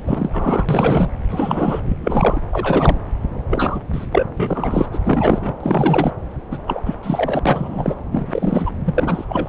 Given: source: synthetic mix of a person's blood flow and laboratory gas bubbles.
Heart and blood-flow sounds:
Doppler ultrasound of blood flow; subclavian vein
0.06-1.10 s: bubbles
1.29-1.81 s: bubbles
1.85-1.98 s: bubbles
2.02-2.42 s: bubbles
2.51-2.99 s: bubbles
3.49-3.81 s: bubbles
3.93-4.05 s: bubbles
4.11-4.26 s: bubbles
4.37-4.89 s: bubbles
4.92-4.98 s: bubbles
5.04-5.57 s: bubbles
5.60-6.13 s: bubbles
6.50-6.57 s: bubbles
6.67-6.82 s: bubbles
6.85-6.95 s: bubbles
7.02-7.39 s: bubbles
7.43-7.95 s: bubbles
8.12-8.71 s: bubbles
8.85-9.25 s: bubbles
9.29-9.49 s: bubbles
From the record:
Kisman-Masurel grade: 343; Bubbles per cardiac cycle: rolling drumbeat, 9 or more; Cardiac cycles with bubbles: 100%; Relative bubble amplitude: loud (0.450 to 0.775); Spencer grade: 3 (all of the cardiac periods contain showers or single bubble signals, but not dominating or overriding the cardiac motion signals); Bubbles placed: anywhere in the cardiac cycle

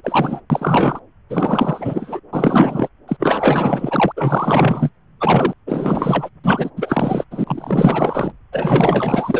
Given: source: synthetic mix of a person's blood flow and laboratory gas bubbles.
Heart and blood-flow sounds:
Doppler ultrasound of blood flow; subclavian vein
0.00-0.41 s: bubbles
0.50-1.00 s: bubbles
1.30-2.19 s: bubbles
2.32-2.88 s: bubbles
3.07-4.12 s: bubbles
4.17-4.90 s: bubbles
5.20-5.54 s: bubbles
5.67-6.29 s: bubbles
6.44-6.70 s: bubbles
6.76-7.25 s: bubbles
7.31-8.32 s: bubbles
8.52-9.40 s: bubbles
From the record:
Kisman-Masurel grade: 444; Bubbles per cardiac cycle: continuous sound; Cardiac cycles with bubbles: 100%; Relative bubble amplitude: maximal (0.775 to 0.999); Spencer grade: 4 (maximum detectable bubble signal sounding continuously throughout systole and diastole of every cardiac period, and overriding the amplitude of the normal cardiac signals); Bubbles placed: anywhere in the cardiac cycle

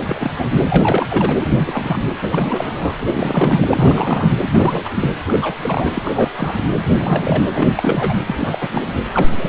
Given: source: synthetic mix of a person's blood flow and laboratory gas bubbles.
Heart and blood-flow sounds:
Doppler ultrasound of blood flow; precordium
0.00-0.03 s: bubbles
0.09-0.30 s: bubbles
0.36-0.49 s: bubbles
0.63-1.37 s: bubbles
1.41-2.02 s: bubbles
2.21-2.93 s: bubbles
3.00-4.31 s: bubbles
4.52-4.89 s: bubbles
5.01-5.08 s: bubbles
5.27-5.92 s: bubbles
5.95-6.30 s: bubbles
6.36-6.63 s: bubbles
6.71-6.91 s: bubbles
6.99-7.43 s: bubbles
7.53-7.72 s: bubbles
7.76-8.14 s: bubbles
8.26-8.35 s: bubbles
8.38-8.93 s: bubbles
9.13-9.49 s: bubbles
From the record:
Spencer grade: 3 (all of the cardiac periods contain showers or single bubble signals, but not dominating or overriding the cardiac motion signals); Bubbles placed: anywhere in the cardiac cycle

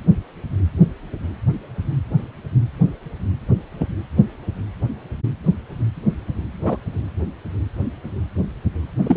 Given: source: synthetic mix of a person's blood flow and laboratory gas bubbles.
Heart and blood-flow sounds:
Doppler ultrasound of blood flow; precordium
3.79-3.86 s: bubbles
6.63-6.77 s: bubbles
9.04-9.17 s: bubbles
From the record:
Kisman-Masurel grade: 123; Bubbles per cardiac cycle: 1 to 2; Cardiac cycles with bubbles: 10 to 50%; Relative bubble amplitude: loud (0.450 to 0.775); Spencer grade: 2 (many but less than half of the cardiac periods contain bubble signals, singularly or in groups); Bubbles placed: anywhere in the cardiac cycle

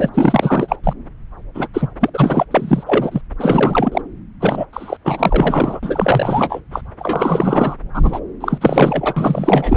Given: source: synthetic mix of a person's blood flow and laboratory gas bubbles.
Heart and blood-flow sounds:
Doppler ultrasound of blood flow; subclavian vein
0.00-0.10 s: bubbles
0.14-0.76 s: bubbles
0.83-0.93 s: bubbles
1.55-1.69 s: bubbles
1.74-1.89 s: bubbles
2.00-2.10 s: bubbles
2.14-2.45 s: bubbles
2.50-2.83 s: bubbles
2.86-3.22 s: bubbles
3.39-4.01 s: bubbles
4.40-4.65 s: bubbles
4.73-4.97 s: bubbles
5.04-5.80 s: bubbles
5.82-6.60 s: bubbles
6.72-6.81 s: bubbles
6.98-7.75 s: bubbles
7.94-8.20 s: bubbles
8.40-8.58 s: bubbles
8.61-9.77 s: bubbles
From the record:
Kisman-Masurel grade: 444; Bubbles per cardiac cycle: continuous sound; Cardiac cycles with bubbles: 100%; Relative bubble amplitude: maximal (0.775 to 0.999); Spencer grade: 4 (maximum detectable bubble signal sounding continuously throughout systole and diastole of every cardiac period, and overriding the amplitude of the normal cardiac signals); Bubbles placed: anywhere in the cardiac cycle

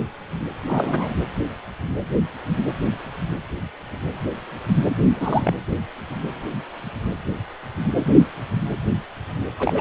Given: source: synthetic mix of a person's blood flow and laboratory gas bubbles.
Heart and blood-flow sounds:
Doppler ultrasound of blood flow; precordium
0.66-1.15 s: bubbles
5.12-5.54 s: bubbles
9.59-9.81 s: bubbles
From the record:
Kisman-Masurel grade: 222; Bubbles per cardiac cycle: several, 3 to 8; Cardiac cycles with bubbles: 10 to 50%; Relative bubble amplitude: moderate (0.250 to 0.450); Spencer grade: 2 (many but less than half of the cardiac periods contain bubble signals, singularly or in groups); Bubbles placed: anywhere in the cardiac cycle

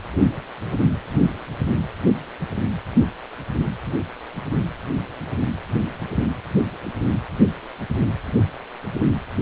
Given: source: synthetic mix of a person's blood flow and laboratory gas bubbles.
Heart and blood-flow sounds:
Doppler ultrasound of blood flow; precordium
no bubbles
From the record:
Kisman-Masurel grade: 000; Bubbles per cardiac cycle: 0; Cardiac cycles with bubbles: 0%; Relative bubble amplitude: no bubbles discernible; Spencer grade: 0 (complete lack of bubble signals)

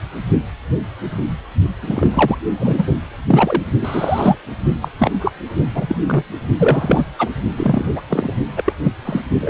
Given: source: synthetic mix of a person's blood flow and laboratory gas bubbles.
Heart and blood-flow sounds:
Doppler ultrasound of blood flow; precordium
1.82-2.36 s: bubbles
2.59-2.84 s: bubbles
3.27-3.62 s: bubbles
3.81-4.36 s: bubbles
4.82-4.88 s: bubbles
4.99-5.11 s: bubbles
5.20-5.32 s: bubbles
5.75-5.96 s: bubbles
6.07-6.25 s: bubbles
6.59-7.05 s: bubbles
7.18-7.29 s: bubbles
7.56-8.02 s: bubbles
8.10-8.34 s: bubbles
8.56-8.73 s: bubbles
8.84-8.92 s: bubbles
9.05-9.21 s: bubbles
9.41-9.50 s: bubbles
From the record:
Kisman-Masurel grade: 233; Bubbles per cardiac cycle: several, 3 to 8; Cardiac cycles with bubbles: 50 to 99%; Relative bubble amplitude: loud (0.450 to 0.775); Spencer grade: 3 (all of the cardiac periods contain showers or single bubble signals, but not dominating or overriding the cardiac motion signals); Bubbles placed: only in the low amplitude regions of the cardiac cycle

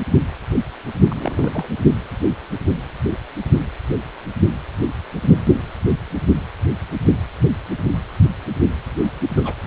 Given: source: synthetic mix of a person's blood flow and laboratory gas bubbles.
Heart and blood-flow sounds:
Doppler ultrasound of blood flow; precordium
1.08-1.68 s: bubbles
9.37-9.58 s: bubbles
9.65-9.67 s: bubbles
From the record:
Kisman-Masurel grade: 221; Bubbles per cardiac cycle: several, 3 to 8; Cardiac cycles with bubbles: 10 to 50%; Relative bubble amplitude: barely perceptible (0.100 to 0.250); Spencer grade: 2 (many but less than half of the cardiac periods contain bubble signals, singularly or in groups); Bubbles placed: only in the low amplitude regions of the cardiac cycle

